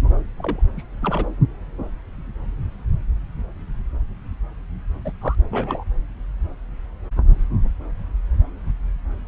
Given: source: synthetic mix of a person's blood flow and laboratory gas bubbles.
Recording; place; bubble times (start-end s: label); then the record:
Doppler ultrasound of blood flow; subclavian vein
0.39-0.61 s: bubbles
0.76-0.82 s: bubbles
1.02-1.26 s: bubbles
5.04-5.12 s: bubbles
5.21-5.35 s: bubbles
5.50-5.84 s: bubbles
From the record:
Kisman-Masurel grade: 221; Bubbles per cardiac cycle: several, 3 to 8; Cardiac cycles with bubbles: 10 to 50%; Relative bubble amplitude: barely perceptible (0.100 to 0.250); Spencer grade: 2 (many but less than half of the cardiac periods contain bubble signals, singularly or in groups); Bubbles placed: anywhere in the cardiac cycle